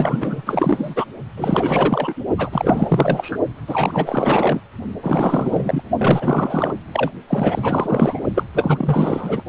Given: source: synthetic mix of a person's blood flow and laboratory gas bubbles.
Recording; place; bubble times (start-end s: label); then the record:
Doppler ultrasound of blood flow; precordium
0.00-0.43 s: bubbles
0.46-1.06 s: bubbles
1.37-2.13 s: bubbles
2.38-3.38 s: bubbles
3.67-4.61 s: bubbles
5.02-5.82 s: bubbles
5.98-6.74 s: bubbles
6.92-7.11 s: bubbles
7.27-8.20 s: bubbles
8.35-8.44 s: bubbles
8.54-9.42 s: bubbles
From the record:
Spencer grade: 4 (maximum detectable bubble signal sounding continuously throughout systole and diastole of every cardiac period, and overriding the amplitude of the normal cardiac signals); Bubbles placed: only in the low amplitude regions of the cardiac cycle